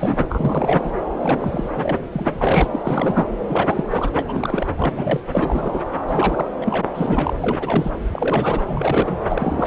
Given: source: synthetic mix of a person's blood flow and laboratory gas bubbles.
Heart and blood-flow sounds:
Doppler ultrasound of blood flow; subclavian vein
0.00-0.91 s: bubbles
1.22-1.70 s: bubbles
1.73-1.96 s: bubbles
2.12-2.69 s: bubbles
2.73-3.27 s: bubbles
3.48-3.83 s: bubbles
3.91-4.11 s: bubbles
4.14-5.21 s: bubbles
5.32-5.85 s: bubbles
6.07-6.52 s: bubbles
6.61-6.89 s: bubbles
6.95-7.33 s: bubbles
7.40-7.92 s: bubbles
8.13-8.62 s: bubbles
8.66-9.18 s: bubbles
9.29-9.67 s: bubbles
From the record:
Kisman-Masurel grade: 342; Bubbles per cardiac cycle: rolling drumbeat, 9 or more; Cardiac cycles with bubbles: 100%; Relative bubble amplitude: moderate (0.250 to 0.450); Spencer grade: 3 (all of the cardiac periods contain showers or single bubble signals, but not dominating or overriding the cardiac motion signals); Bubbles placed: anywhere in the cardiac cycle

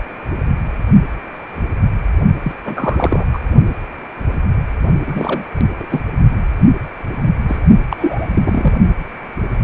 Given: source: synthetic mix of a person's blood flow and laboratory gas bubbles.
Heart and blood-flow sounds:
Doppler ultrasound of blood flow; precordium
2.42-2.52 s: bubbles
2.65-3.26 s: bubbles
3.33-3.39 s: bubbles
5.06-5.43 s: bubbles
5.79-6.00 s: bubbles
7.47-7.59 s: bubbles
7.70-7.78 s: bubbles
7.90-8.79 s: bubbles
From the record:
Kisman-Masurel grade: 332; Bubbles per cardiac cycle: rolling drumbeat, 9 or more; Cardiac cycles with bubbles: 50 to 99%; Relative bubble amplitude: moderate (0.250 to 0.450); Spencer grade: 3 (all of the cardiac periods contain showers or single bubble signals, but not dominating or overriding the cardiac motion signals); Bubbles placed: only in the low amplitude regions of the cardiac cycle

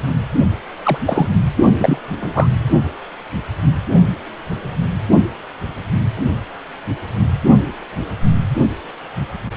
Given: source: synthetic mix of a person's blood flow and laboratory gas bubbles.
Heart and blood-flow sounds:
Doppler ultrasound of blood flow; precordium
0.00-0.11 s: bubbles
0.83-0.98 s: bubbles
1.06-1.28 s: bubbles
1.77-1.98 s: bubbles
2.22-2.48 s: bubbles
From the record:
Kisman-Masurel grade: 223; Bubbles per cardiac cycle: several, 3 to 8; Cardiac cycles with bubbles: 10 to 50%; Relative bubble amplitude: loud (0.450 to 0.775); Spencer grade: 2 (many but less than half of the cardiac periods contain bubble signals, singularly or in groups); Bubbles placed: only in the low amplitude regions of the cardiac cycle

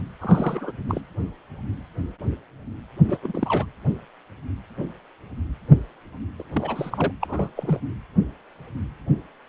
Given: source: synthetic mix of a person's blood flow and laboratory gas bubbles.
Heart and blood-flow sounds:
Doppler ultrasound of blood flow; precordium
0.20-0.72 s: bubbles
0.89-1.01 s: bubbles
3.08-3.18 s: bubbles
3.23-3.66 s: bubbles
6.38-6.43 s: bubbles
6.53-7.12 s: bubbles
7.21-7.51 s: bubbles
7.56-7.80 s: bubbles
From the record:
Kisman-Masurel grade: 221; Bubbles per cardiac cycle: several, 3 to 8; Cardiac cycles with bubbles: 10 to 50%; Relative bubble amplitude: barely perceptible (0.100 to 0.250); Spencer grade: 2 (many but less than half of the cardiac periods contain bubble signals, singularly or in groups); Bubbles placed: anywhere in the cardiac cycle

